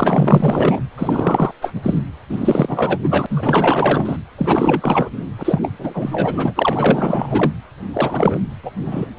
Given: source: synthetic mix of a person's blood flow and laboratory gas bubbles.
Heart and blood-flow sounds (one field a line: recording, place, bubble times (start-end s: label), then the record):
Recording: Doppler ultrasound of blood flow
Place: precordium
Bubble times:
0.00-0.80 s: bubbles
0.98-1.51 s: bubbles
1.61-1.80 s: bubbles
1.83-1.99 s: bubbles
2.29-2.99 s: bubbles
3.03-3.26 s: bubbles
3.29-4.17 s: bubbles
4.38-5.09 s: bubbles
5.38-5.59 s: bubbles
5.62-5.71 s: bubbles
5.79-7.52 s: bubbles
7.93-8.38 s: bubbles
8.62-8.71 s: bubbles
8.85-9.06 s: bubbles
From the record:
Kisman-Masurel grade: 444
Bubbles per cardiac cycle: continuous sound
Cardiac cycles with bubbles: 100%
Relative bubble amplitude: maximal (0.775 to 0.999)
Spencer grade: 4 (maximum detectable bubble signal sounding continuously throughout systole and diastole of every cardiac period, and overriding the amplitude of the normal cardiac signals)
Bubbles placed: anywhere in the cardiac cycle